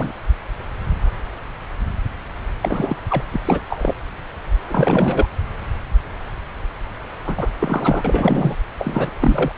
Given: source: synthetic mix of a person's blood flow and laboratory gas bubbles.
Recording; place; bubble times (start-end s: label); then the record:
Doppler ultrasound of blood flow; subclavian vein
0.00-0.12 s: bubbles
2.62-2.96 s: bubbles
3.09-3.24 s: bubbles
3.32-3.41 s: bubbles
3.45-3.61 s: bubbles
3.70-3.94 s: bubbles
4.68-5.25 s: bubbles
7.26-7.50 s: bubbles
7.60-8.56 s: bubbles
8.79-9.10 s: bubbles
9.20-9.52 s: bubbles
From the record:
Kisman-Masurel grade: 333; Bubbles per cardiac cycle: rolling drumbeat, 9 or more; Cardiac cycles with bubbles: 50 to 99%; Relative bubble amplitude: loud (0.450 to 0.775); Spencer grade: 3 (all of the cardiac periods contain showers or single bubble signals, but not dominating or overriding the cardiac motion signals); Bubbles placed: anywhere in the cardiac cycle